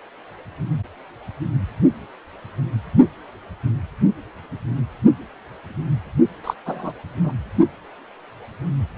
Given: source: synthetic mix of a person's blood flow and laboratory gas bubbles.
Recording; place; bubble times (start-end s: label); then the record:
Doppler ultrasound of blood flow; precordium
6.44-6.54 s: bubbles
6.65-6.92 s: bubbles
7.23-7.32 s: bubbles
From the record:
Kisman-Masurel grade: 212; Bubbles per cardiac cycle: several, 3 to 8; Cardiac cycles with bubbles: 1 to 10%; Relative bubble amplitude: moderate (0.250 to 0.450); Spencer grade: 1 (occasional bubble signal discernible with the cardiac motion signal, with majority of cardiac periods free of bubbles); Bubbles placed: only in the low amplitude regions of the cardiac cycle